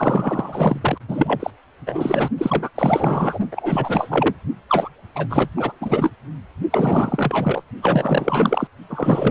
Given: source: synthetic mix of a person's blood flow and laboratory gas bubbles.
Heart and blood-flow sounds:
Doppler ultrasound of blood flow; precordium
0.00-0.98 s: bubbles
1.08-1.51 s: bubbles
1.86-2.28 s: bubbles
2.38-2.69 s: bubbles
2.75-3.38 s: bubbles
3.51-4.34 s: bubbles
4.68-4.89 s: bubbles
5.15-5.26 s: bubbles
5.29-5.48 s: bubbles
5.56-5.72 s: bubbles
5.80-6.10 s: bubbles
6.70-7.63 s: bubbles
7.82-8.67 s: bubbles
8.90-9.30 s: bubbles
From the record:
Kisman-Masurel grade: 444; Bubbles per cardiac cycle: continuous sound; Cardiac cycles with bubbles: 100%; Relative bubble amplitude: maximal (0.775 to 0.999); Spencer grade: 4 (maximum detectable bubble signal sounding continuously throughout systole and diastole of every cardiac period, and overriding the amplitude of the normal cardiac signals); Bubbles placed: only in the low amplitude regions of the cardiac cycle

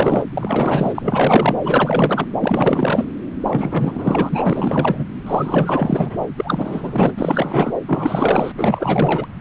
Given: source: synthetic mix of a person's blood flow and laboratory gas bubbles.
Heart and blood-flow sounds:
Doppler ultrasound of blood flow; subclavian vein
0.00-0.25 s: bubbles
0.34-1.56 s: bubbles
1.63-2.25 s: bubbles
2.40-3.05 s: bubbles
3.42-5.04 s: bubbles
5.26-6.25 s: bubbles
6.37-7.12 s: bubbles
7.16-7.74 s: bubbles
7.87-8.52 s: bubbles
8.57-9.26 s: bubbles
From the record:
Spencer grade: 4 (maximum detectable bubble signal sounding continuously throughout systole and diastole of every cardiac period, and overriding the amplitude of the normal cardiac signals); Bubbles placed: anywhere in the cardiac cycle

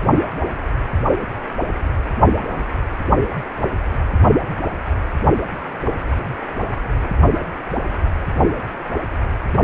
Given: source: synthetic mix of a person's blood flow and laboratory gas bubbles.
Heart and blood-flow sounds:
Doppler ultrasound of blood flow; precordium
2.48-2.65 s: bubbles
From the record:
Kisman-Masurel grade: 111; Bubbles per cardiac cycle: 1 to 2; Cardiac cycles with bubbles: 1 to 10%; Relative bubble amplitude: barely perceptible (0.100 to 0.250); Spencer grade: 1 (occasional bubble signal discernible with the cardiac motion signal, with majority of cardiac periods free of bubbles); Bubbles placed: only in the low amplitude regions of the cardiac cycle

